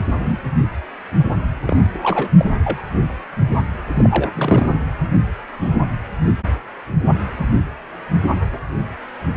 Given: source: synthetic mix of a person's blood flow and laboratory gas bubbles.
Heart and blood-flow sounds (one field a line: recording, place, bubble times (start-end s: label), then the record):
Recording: Doppler ultrasound of blood flow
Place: precordium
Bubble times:
0.13-0.39 s: bubbles
1.66-1.77 s: bubbles
1.94-1.99 s: bubbles
2.02-2.31 s: bubbles
2.39-2.45 s: bubbles
2.64-2.82 s: bubbles
3.94-4.28 s: bubbles
4.33-4.67 s: bubbles
From the record:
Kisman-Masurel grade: 232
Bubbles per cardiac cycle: several, 3 to 8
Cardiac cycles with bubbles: 50 to 99%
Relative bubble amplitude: moderate (0.250 to 0.450)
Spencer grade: 3 (all of the cardiac periods contain showers or single bubble signals, but not dominating or overriding the cardiac motion signals)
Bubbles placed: anywhere in the cardiac cycle